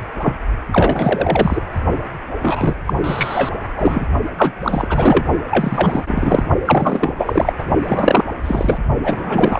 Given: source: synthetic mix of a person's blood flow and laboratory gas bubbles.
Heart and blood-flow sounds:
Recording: Doppler ultrasound of blood flow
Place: precordium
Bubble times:
0.22-0.36 s: bubbles
0.72-1.61 s: bubbles
2.42-2.75 s: bubbles
2.86-2.94 s: bubbles
3.04-3.51 s: bubbles
3.76-4.07 s: bubbles
4.37-4.52 s: bubbles
4.62-5.25 s: bubbles
5.50-6.04 s: bubbles
6.06-6.47 s: bubbles
6.65-7.53 s: bubbles
7.58-7.64 s: bubbles
7.82-8.23 s: bubbles
8.43-8.78 s: bubbles
9.03-9.60 s: bubbles
From the record:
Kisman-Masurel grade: 343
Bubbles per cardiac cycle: rolling drumbeat, 9 or more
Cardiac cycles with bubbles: 100%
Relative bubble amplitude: loud (0.450 to 0.775)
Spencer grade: 3 (all of the cardiac periods contain showers or single bubble signals, but not dominating or overriding the cardiac motion signals)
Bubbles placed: only in the low amplitude regions of the cardiac cycle

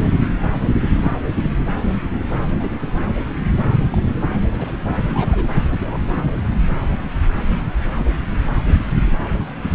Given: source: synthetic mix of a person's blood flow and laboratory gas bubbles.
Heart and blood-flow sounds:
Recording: Doppler ultrasound of blood flow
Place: subclavian vein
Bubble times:
0.92-1.17 s: bubbles
2.59-2.73 s: bubbles
2.83-2.88 s: bubbles
3.92-4.02 s: bubbles
4.51-4.72 s: bubbles
5.13-5.48 s: bubbles
5.71-5.98 s: bubbles
From the record:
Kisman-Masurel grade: 121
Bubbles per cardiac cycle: 1 to 2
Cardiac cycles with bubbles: 10 to 50%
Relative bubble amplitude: barely perceptible (0.100 to 0.250)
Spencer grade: 2 (many but less than half of the cardiac periods contain bubble signals, singularly or in groups)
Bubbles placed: anywhere in the cardiac cycle

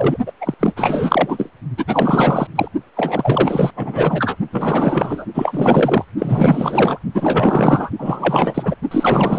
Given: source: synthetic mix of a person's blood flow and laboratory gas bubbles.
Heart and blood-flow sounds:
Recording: Doppler ultrasound of blood flow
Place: precordium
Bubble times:
0.00-0.17 s: bubbles
0.26-0.32 s: bubbles
0.40-0.54 s: bubbles
0.59-1.52 s: bubbles
1.77-1.85 s: bubbles
1.88-2.47 s: bubbles
2.55-2.68 s: bubbles
2.96-3.71 s: bubbles
3.76-4.35 s: bubbles
4.52-5.25 s: bubbles
5.33-6.05 s: bubbles
6.17-6.99 s: bubbles
7.14-7.90 s: bubbles
7.98-8.75 s: bubbles
8.91-9.39 s: bubbles
From the record:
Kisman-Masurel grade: 444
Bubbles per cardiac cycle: continuous sound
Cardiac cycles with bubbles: 100%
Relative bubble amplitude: maximal (0.775 to 0.999)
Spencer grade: 4 (maximum detectable bubble signal sounding continuously throughout systole and diastole of every cardiac period, and overriding the amplitude of the normal cardiac signals)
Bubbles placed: only in the low amplitude regions of the cardiac cycle

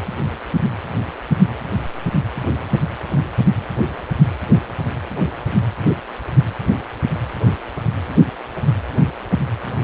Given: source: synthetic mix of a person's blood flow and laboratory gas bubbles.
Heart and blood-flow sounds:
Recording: Doppler ultrasound of blood flow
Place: precordium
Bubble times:
no bubbles
From the record:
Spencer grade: 0 (complete lack of bubble signals)

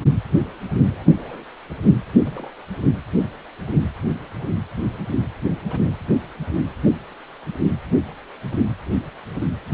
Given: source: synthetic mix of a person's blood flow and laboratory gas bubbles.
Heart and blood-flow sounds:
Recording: Doppler ultrasound of blood flow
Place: precordium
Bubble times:
0.82-1.05 s: bubbles
1.16-1.44 s: bubbles
2.25-2.50 s: bubbles
5.67-5.91 s: bubbles
8.07-8.13 s: bubbles
From the record:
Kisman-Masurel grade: 121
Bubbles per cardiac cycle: 1 to 2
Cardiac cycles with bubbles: 10 to 50%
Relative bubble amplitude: barely perceptible (0.100 to 0.250)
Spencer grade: 2 (many but less than half of the cardiac periods contain bubble signals, singularly or in groups)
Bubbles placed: anywhere in the cardiac cycle

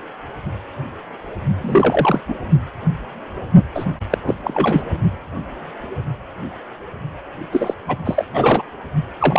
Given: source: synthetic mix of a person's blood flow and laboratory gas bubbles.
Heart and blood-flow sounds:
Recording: Doppler ultrasound of blood flow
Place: precordium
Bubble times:
1.61-2.21 s: bubbles
2.28-2.34 s: bubbles
3.74-3.85 s: bubbles
4.10-4.18 s: bubbles
4.25-4.82 s: bubbles
7.51-7.74 s: bubbles
7.88-7.96 s: bubbles
8.04-8.25 s: bubbles
8.33-8.63 s: bubbles
9.19-9.39 s: bubbles
From the record:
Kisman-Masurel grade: 223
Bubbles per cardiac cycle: several, 3 to 8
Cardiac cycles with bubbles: 10 to 50%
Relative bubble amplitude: loud (0.450 to 0.775)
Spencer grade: 2 (many but less than half of the cardiac periods contain bubble signals, singularly or in groups)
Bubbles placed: only in the low amplitude regions of the cardiac cycle

